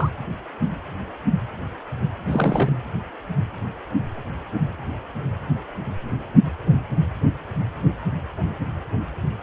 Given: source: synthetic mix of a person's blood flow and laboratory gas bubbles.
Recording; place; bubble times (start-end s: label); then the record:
Doppler ultrasound of blood flow; precordium
0.00-0.10 s: bubbles
2.27-2.72 s: bubbles
From the record:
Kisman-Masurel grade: 212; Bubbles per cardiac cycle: several, 3 to 8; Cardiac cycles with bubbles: 1 to 10%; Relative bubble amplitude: moderate (0.250 to 0.450); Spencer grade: 1 (occasional bubble signal discernible with the cardiac motion signal, with majority of cardiac periods free of bubbles); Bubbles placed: anywhere in the cardiac cycle